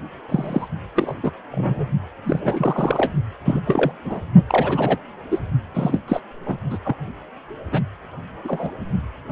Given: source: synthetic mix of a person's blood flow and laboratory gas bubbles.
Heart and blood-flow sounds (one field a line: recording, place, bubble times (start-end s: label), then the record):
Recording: Doppler ultrasound of blood flow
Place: precordium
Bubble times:
0.29-0.68 s: bubbles
0.95-1.19 s: bubbles
1.23-1.30 s: bubbles
1.51-1.88 s: bubbles
2.24-3.12 s: bubbles
3.45-3.61 s: bubbles
3.66-3.92 s: bubbles
4.05-4.20 s: bubbles
4.48-4.97 s: bubbles
5.31-5.39 s: bubbles
5.74-6.00 s: bubbles
6.08-6.21 s: bubbles
6.41-6.63 s: bubbles
6.69-6.78 s: bubbles
6.84-6.96 s: bubbles
7.71-7.82 s: bubbles
8.44-8.71 s: bubbles
From the record:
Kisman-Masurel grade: 242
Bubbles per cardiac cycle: several, 3 to 8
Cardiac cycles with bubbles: 100%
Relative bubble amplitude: moderate (0.250 to 0.450)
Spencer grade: 3 (all of the cardiac periods contain showers or single bubble signals, but not dominating or overriding the cardiac motion signals)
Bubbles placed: only in the low amplitude regions of the cardiac cycle